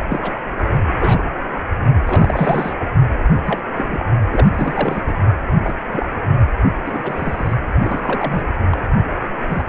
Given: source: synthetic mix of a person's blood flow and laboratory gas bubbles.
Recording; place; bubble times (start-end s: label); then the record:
Doppler ultrasound of blood flow; precordium
0.10-0.20 s: bubbles
0.23-0.33 s: bubbles
0.72-0.82 s: bubbles
1.00-1.35 s: bubbles
2.06-2.73 s: bubbles
3.46-3.59 s: bubbles
3.75-4.04 s: bubbles
4.30-5.02 s: bubbles
5.07-5.13 s: bubbles
5.63-5.75 s: bubbles
5.92-6.08 s: bubbles
6.86-7.54 s: bubbles
7.83-8.52 s: bubbles
8.71-8.77 s: bubbles
9.48-9.62 s: bubbles
From the record:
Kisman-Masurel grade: 242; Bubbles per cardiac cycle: several, 3 to 8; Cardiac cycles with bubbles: 100%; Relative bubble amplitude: moderate (0.250 to 0.450); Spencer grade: 3 (all of the cardiac periods contain showers or single bubble signals, but not dominating or overriding the cardiac motion signals); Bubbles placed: anywhere in the cardiac cycle